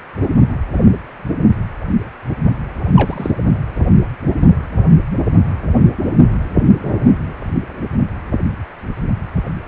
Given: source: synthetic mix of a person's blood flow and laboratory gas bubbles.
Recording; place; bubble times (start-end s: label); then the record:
Doppler ultrasound of blood flow; precordium
2.95-3.31 s: bubbles
From the record:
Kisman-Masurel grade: 112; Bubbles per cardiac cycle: 1 to 2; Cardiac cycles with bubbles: 1 to 10%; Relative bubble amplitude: moderate (0.250 to 0.450); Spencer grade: 1 (occasional bubble signal discernible with the cardiac motion signal, with majority of cardiac periods free of bubbles); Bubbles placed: anywhere in the cardiac cycle